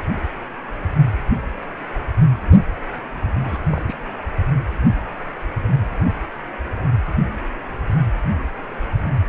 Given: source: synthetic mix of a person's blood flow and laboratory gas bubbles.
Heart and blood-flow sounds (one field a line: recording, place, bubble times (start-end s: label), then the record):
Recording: Doppler ultrasound of blood flow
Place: precordium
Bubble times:
3.42-3.58 s: bubbles
3.71-3.82 s: bubbles
3.87-3.96 s: bubbles
From the record:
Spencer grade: 1 (occasional bubble signal discernible with the cardiac motion signal, with majority of cardiac periods free of bubbles)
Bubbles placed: anywhere in the cardiac cycle